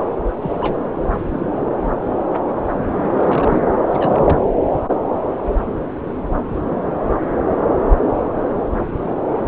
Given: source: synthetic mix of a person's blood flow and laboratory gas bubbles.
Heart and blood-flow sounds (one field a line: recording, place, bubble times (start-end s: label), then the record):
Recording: Doppler ultrasound of blood flow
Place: subclavian vein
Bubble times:
0.41-0.52 s: bubbles
0.59-0.77 s: bubbles
0.86-0.89 s: bubbles
1.14-1.21 s: bubbles
1.33-1.47 s: bubbles
3.03-3.59 s: bubbles
3.91-4.39 s: bubbles
From the record:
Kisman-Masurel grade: 221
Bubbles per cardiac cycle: several, 3 to 8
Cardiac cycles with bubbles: 10 to 50%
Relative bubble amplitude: barely perceptible (0.100 to 0.250)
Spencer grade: 2 (many but less than half of the cardiac periods contain bubble signals, singularly or in groups)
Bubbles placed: anywhere in the cardiac cycle